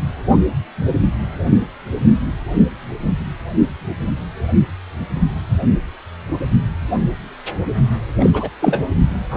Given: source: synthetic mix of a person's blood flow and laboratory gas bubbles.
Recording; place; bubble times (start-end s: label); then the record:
Doppler ultrasound of blood flow; precordium
8.19-8.30 s: bubbles
8.33-8.49 s: bubbles
8.61-8.82 s: bubbles
9.30-9.37 s: bubbles
From the record:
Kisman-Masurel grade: 222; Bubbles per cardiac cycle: several, 3 to 8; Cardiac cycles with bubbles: 10 to 50%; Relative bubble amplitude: moderate (0.250 to 0.450); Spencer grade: 2 (many but less than half of the cardiac periods contain bubble signals, singularly or in groups); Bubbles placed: only in the low amplitude regions of the cardiac cycle